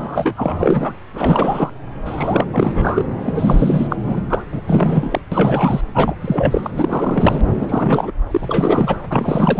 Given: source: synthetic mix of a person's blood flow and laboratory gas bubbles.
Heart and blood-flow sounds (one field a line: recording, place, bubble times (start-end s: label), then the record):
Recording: Doppler ultrasound of blood flow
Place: subclavian vein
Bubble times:
0.00-0.32 s: bubbles
0.36-0.97 s: bubbles
1.14-1.70 s: bubbles
2.06-2.45 s: bubbles
2.52-3.04 s: bubbles
3.19-3.87 s: bubbles
3.90-3.96 s: bubbles
4.03-4.21 s: bubbles
4.29-4.45 s: bubbles
4.52-4.61 s: bubbles
4.67-5.21 s: bubbles
5.32-5.81 s: bubbles
5.94-6.15 s: bubbles
6.21-6.71 s: bubbles
6.75-7.41 s: bubbles
7.58-8.11 s: bubbles
8.31-8.96 s: bubbles
9.10-9.59 s: bubbles
From the record:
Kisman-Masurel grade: 343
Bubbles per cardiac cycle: rolling drumbeat, 9 or more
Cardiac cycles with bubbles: 100%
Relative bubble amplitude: loud (0.450 to 0.775)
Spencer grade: 3 (all of the cardiac periods contain showers or single bubble signals, but not dominating or overriding the cardiac motion signals)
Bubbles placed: anywhere in the cardiac cycle